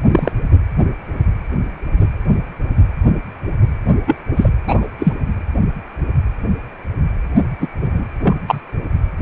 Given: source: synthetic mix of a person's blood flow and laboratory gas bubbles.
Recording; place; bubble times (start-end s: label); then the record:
Doppler ultrasound of blood flow; precordium
0.11-0.32 s: bubbles
4.07-4.16 s: bubbles
4.36-4.50 s: bubbles
4.67-4.88 s: bubbles
4.99-5.13 s: bubbles
7.60-7.68 s: bubbles
7.82-8.04 s: bubbles
8.21-8.34 s: bubbles
8.47-8.61 s: bubbles
From the record:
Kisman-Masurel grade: 123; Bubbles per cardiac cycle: 1 to 2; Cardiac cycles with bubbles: 10 to 50%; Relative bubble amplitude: loud (0.450 to 0.775); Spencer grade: 2 (many but less than half of the cardiac periods contain bubble signals, singularly or in groups); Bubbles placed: anywhere in the cardiac cycle